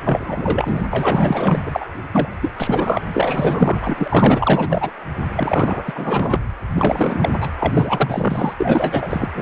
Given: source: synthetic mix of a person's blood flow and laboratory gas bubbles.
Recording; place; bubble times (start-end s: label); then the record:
Doppler ultrasound of blood flow; precordium
0.01-0.83 s: bubbles
0.92-1.86 s: bubbles
2.12-2.34 s: bubbles
2.42-2.51 s: bubbles
2.58-3.01 s: bubbles
3.11-4.91 s: bubbles
5.36-6.40 s: bubbles
6.75-7.31 s: bubbles
7.40-7.50 s: bubbles
7.60-8.54 s: bubbles
8.58-9.29 s: bubbles
9.34-9.42 s: bubbles
From the record:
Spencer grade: 4 (maximum detectable bubble signal sounding continuously throughout systole and diastole of every cardiac period, and overriding the amplitude of the normal cardiac signals); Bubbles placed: anywhere in the cardiac cycle